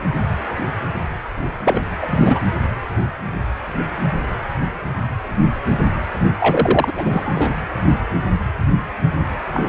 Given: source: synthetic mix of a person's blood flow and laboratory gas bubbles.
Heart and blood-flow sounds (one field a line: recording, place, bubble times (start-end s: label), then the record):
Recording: Doppler ultrasound of blood flow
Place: precordium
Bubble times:
1.64-1.85 s: bubbles
2.02-2.07 s: bubbles
2.10-2.42 s: bubbles
6.39-7.53 s: bubbles
9.53-9.68 s: bubbles
From the record:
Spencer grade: 2 (many but less than half of the cardiac periods contain bubble signals, singularly or in groups)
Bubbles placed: anywhere in the cardiac cycle